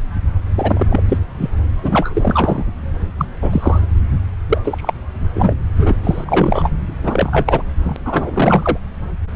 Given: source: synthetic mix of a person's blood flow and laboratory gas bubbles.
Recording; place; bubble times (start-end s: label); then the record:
Doppler ultrasound of blood flow; subclavian vein
0.54-0.87 s: bubbles
0.90-1.03 s: bubbles
1.08-1.19 s: bubbles
1.38-1.50 s: bubbles
1.79-2.65 s: bubbles
3.18-3.26 s: bubbles
3.42-3.80 s: bubbles
4.49-4.58 s: bubbles
4.64-4.93 s: bubbles
5.33-5.55 s: bubbles
5.77-5.96 s: bubbles
6.04-6.70 s: bubbles
7.03-7.62 s: bubbles
7.83-7.96 s: bubbles
8.05-8.78 s: bubbles
From the record:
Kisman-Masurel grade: 243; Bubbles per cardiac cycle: several, 3 to 8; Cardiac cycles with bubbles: 100%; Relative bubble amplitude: loud (0.450 to 0.775); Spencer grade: 3 (all of the cardiac periods contain showers or single bubble signals, but not dominating or overriding the cardiac motion signals); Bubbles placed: anywhere in the cardiac cycle